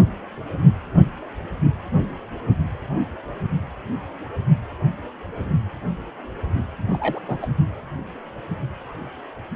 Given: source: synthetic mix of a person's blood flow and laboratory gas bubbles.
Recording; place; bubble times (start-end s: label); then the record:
Doppler ultrasound of blood flow; precordium
6.89-7.21 s: bubbles
7.23-7.47 s: bubbles
From the record:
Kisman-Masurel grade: 212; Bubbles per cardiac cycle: several, 3 to 8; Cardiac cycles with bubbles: 1 to 10%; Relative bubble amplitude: moderate (0.250 to 0.450); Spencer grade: 1 (occasional bubble signal discernible with the cardiac motion signal, with majority of cardiac periods free of bubbles); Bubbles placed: only in the low amplitude regions of the cardiac cycle